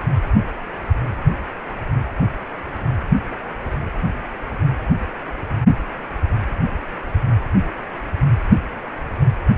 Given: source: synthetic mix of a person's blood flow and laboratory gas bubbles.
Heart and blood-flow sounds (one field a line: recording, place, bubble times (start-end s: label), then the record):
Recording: Doppler ultrasound of blood flow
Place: precordium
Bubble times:
no bubbles
From the record:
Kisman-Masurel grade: 000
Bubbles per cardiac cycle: 0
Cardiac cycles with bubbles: 0%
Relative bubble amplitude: no bubbles discernible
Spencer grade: 0 (complete lack of bubble signals)